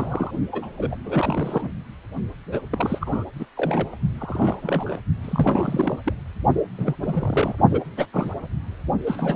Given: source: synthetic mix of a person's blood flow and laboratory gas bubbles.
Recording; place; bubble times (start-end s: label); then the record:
Doppler ultrasound of blood flow; precordium
0.00-0.31 s: bubbles
0.52-0.70 s: bubbles
0.78-0.96 s: bubbles
1.04-1.69 s: bubbles
2.51-2.61 s: bubbles
2.70-3.24 s: bubbles
3.39-3.46 s: bubbles
3.56-3.97 s: bubbles
4.18-4.59 s: bubbles
4.62-4.98 s: bubbles
5.23-5.99 s: bubbles
6.04-6.13 s: bubbles
6.78-6.96 s: bubbles
7.00-7.56 s: bubbles
7.71-7.84 s: bubbles
7.97-8.06 s: bubbles
8.13-8.31 s: bubbles
9.06-9.36 s: bubbles
From the record:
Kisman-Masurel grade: 342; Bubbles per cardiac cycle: rolling drumbeat, 9 or more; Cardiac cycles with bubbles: 100%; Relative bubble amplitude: moderate (0.250 to 0.450); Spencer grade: 3 (all of the cardiac periods contain showers or single bubble signals, but not dominating or overriding the cardiac motion signals); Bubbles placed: only in the low amplitude regions of the cardiac cycle